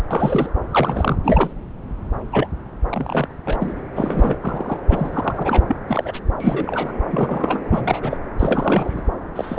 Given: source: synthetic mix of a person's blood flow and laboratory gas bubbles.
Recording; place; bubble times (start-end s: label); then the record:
Doppler ultrasound of blood flow; subclavian vein
0.10-0.49 s: bubbles
0.71-1.16 s: bubbles
1.24-1.53 s: bubbles
2.32-2.47 s: bubbles
2.88-3.28 s: bubbles
3.31-3.33 s: bubbles
3.46-3.73 s: bubbles
3.96-4.37 s: bubbles
4.41-4.79 s: bubbles
4.88-5.63 s: bubbles
5.68-5.75 s: bubbles
5.88-6.20 s: bubbles
6.40-6.92 s: bubbles
7.11-7.61 s: bubbles
7.70-8.17 s: bubbles
8.39-9.03 s: bubbles
9.36-9.59 s: bubbles
From the record:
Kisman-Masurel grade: 242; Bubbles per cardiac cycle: several, 3 to 8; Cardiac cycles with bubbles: 100%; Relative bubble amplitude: moderate (0.250 to 0.450); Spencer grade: 3 (all of the cardiac periods contain showers or single bubble signals, but not dominating or overriding the cardiac motion signals); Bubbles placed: anywhere in the cardiac cycle